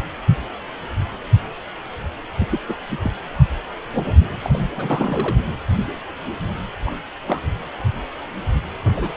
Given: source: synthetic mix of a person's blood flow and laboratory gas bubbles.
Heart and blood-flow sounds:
Doppler ultrasound of blood flow; precordium
2.38-2.59 s: bubbles
2.68-2.74 s: bubbles
2.91-2.98 s: bubbles
3.04-3.12 s: bubbles
4.42-4.64 s: bubbles
4.75-5.37 s: bubbles
6.84-6.91 s: bubbles
7.26-7.40 s: bubbles
8.84-9.17 s: bubbles
From the record:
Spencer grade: 2 (many but less than half of the cardiac periods contain bubble signals, singularly or in groups); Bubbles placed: anywhere in the cardiac cycle

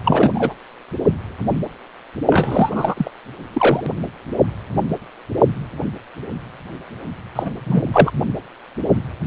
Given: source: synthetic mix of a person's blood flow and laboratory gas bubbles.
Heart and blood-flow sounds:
Doppler ultrasound of blood flow; precordium
0.04-0.32 s: bubbles
0.35-0.54 s: bubbles
2.30-3.11 s: bubbles
3.53-3.81 s: bubbles
7.35-7.50 s: bubbles
7.66-7.82 s: bubbles
7.92-8.11 s: bubbles
From the record:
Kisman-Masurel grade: 233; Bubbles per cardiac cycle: several, 3 to 8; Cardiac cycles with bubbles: 50 to 99%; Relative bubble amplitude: loud (0.450 to 0.775); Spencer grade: 3 (all of the cardiac periods contain showers or single bubble signals, but not dominating or overriding the cardiac motion signals); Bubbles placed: only in the low amplitude regions of the cardiac cycle

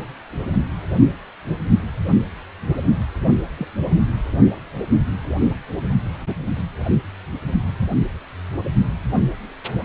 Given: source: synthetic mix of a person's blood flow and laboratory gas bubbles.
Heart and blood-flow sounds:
Doppler ultrasound of blood flow; precordium
3.57-3.68 s: bubbles
From the record:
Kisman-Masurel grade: 121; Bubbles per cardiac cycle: 1 to 2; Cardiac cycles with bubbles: 10 to 50%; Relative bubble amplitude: barely perceptible (0.100 to 0.250); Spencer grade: 2 (many but less than half of the cardiac periods contain bubble signals, singularly or in groups); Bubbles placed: only in the low amplitude regions of the cardiac cycle

